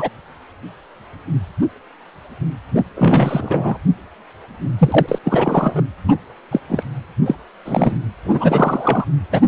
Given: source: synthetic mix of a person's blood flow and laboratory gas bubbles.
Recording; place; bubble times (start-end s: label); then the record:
Doppler ultrasound of blood flow; precordium
0.00-0.10 s: bubbles
2.75-2.83 s: bubbles
2.95-3.77 s: bubbles
4.78-5.18 s: bubbles
5.23-5.82 s: bubbles
6.08-6.13 s: bubbles
6.51-6.59 s: bubbles
6.68-6.83 s: bubbles
7.26-7.35 s: bubbles
7.64-7.97 s: bubbles
8.24-9.04 s: bubbles
9.31-9.41 s: bubbles
From the record:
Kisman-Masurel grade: 233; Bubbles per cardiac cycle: several, 3 to 8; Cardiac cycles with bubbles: 50 to 99%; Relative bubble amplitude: loud (0.450 to 0.775); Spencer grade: 3 (all of the cardiac periods contain showers or single bubble signals, but not dominating or overriding the cardiac motion signals); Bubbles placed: anywhere in the cardiac cycle